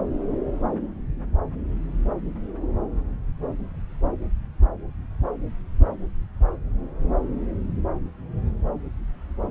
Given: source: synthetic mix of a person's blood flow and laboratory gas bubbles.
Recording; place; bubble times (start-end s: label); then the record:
Doppler ultrasound of blood flow; subclavian vein
no bubbles
From the record:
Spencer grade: 0 (complete lack of bubble signals)